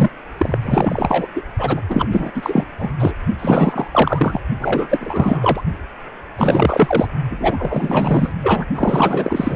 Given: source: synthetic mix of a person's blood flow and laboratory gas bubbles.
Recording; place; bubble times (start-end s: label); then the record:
Doppler ultrasound of blood flow; precordium
0.00-0.10 s: bubbles
0.38-0.58 s: bubbles
0.61-1.27 s: bubbles
1.35-1.43 s: bubbles
1.57-1.81 s: bubbles
1.89-2.08 s: bubbles
2.11-2.30 s: bubbles
2.34-2.67 s: bubbles
2.79-2.91 s: bubbles
2.99-3.13 s: bubbles
3.38-3.88 s: bubbles
3.91-4.41 s: bubbles
4.59-5.61 s: bubbles
6.38-7.08 s: bubbles
7.30-8.33 s: bubbles
8.43-8.65 s: bubbles
8.75-9.56 s: bubbles
From the record:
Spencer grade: 4 (maximum detectable bubble signal sounding continuously throughout systole and diastole of every cardiac period, and overriding the amplitude of the normal cardiac signals); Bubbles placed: only in the low amplitude regions of the cardiac cycle